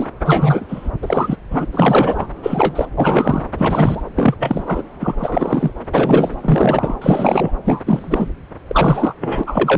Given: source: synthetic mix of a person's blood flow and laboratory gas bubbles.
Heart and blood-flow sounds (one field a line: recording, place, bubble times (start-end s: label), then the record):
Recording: Doppler ultrasound of blood flow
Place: subclavian vein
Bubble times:
0.00-0.07 s: bubbles
0.25-0.89 s: bubbles
1.02-1.36 s: bubbles
1.50-1.66 s: bubbles
1.72-2.27 s: bubbles
2.42-2.86 s: bubbles
2.97-3.48 s: bubbles
3.58-4.03 s: bubbles
4.16-4.34 s: bubbles
4.39-4.83 s: bubbles
5.00-5.14 s: bubbles
5.20-5.71 s: bubbles
5.94-6.35 s: bubbles
6.42-6.96 s: bubbles
7.01-7.51 s: bubbles
7.65-7.82 s: bubbles
7.86-8.30 s: bubbles
8.69-9.14 s: bubbles
9.20-9.44 s: bubbles
9.46-9.78 s: bubbles
From the record:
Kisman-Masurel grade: 333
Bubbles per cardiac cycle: rolling drumbeat, 9 or more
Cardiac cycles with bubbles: 50 to 99%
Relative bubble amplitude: loud (0.450 to 0.775)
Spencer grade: 3 (all of the cardiac periods contain showers or single bubble signals, but not dominating or overriding the cardiac motion signals)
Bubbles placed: anywhere in the cardiac cycle